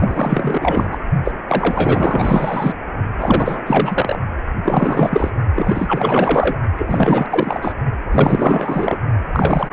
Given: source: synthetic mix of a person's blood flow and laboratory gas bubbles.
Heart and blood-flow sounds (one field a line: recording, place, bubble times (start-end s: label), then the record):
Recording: Doppler ultrasound of blood flow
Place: precordium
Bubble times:
0.00-0.98 s: bubbles
1.24-1.31 s: bubbles
1.49-2.75 s: bubbles
3.17-3.62 s: bubbles
3.67-4.19 s: bubbles
4.63-5.30 s: bubbles
5.55-6.58 s: bubbles
6.78-7.26 s: bubbles
7.29-7.72 s: bubbles
8.11-8.98 s: bubbles
9.32-9.68 s: bubbles
From the record:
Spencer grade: 4 (maximum detectable bubble signal sounding continuously throughout systole and diastole of every cardiac period, and overriding the amplitude of the normal cardiac signals)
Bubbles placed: only in the low amplitude regions of the cardiac cycle